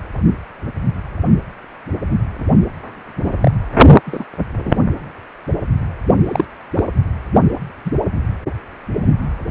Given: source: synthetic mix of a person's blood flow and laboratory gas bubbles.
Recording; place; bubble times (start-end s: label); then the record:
Doppler ultrasound of blood flow; precordium
3.16-3.38 s: bubbles
3.41-3.51 s: bubbles
4.05-4.24 s: bubbles
4.56-4.76 s: bubbles
6.23-6.45 s: bubbles
6.74-6.83 s: bubbles
7.85-7.91 s: bubbles
From the record:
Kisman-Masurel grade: 123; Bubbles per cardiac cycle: 1 to 2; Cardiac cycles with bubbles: 10 to 50%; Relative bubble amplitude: loud (0.450 to 0.775); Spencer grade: 2 (many but less than half of the cardiac periods contain bubble signals, singularly or in groups); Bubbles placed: only in the low amplitude regions of the cardiac cycle